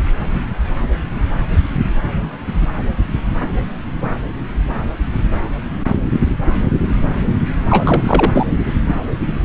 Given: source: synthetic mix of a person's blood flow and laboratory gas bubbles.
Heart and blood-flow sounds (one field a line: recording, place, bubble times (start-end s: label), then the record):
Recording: Doppler ultrasound of blood flow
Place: subclavian vein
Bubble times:
7.69-8.03 s: bubbles
8.06-8.47 s: bubbles
From the record:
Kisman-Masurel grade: 223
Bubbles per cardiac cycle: several, 3 to 8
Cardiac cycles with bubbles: 10 to 50%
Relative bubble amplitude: loud (0.450 to 0.775)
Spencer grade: 2 (many but less than half of the cardiac periods contain bubble signals, singularly or in groups)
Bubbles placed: anywhere in the cardiac cycle